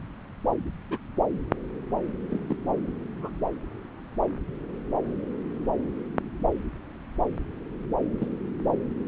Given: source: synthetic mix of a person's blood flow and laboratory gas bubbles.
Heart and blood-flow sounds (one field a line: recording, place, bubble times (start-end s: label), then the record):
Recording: Doppler ultrasound of blood flow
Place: subclavian vein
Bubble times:
0.90-0.97 s: bubbles
2.31-2.40 s: bubbles
2.50-2.55 s: bubbles
3.16-3.31 s: bubbles
8.18-8.28 s: bubbles
From the record:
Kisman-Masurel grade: 121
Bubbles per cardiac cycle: 1 to 2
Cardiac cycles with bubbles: 10 to 50%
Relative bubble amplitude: barely perceptible (0.100 to 0.250)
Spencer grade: 2 (many but less than half of the cardiac periods contain bubble signals, singularly or in groups)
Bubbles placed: anywhere in the cardiac cycle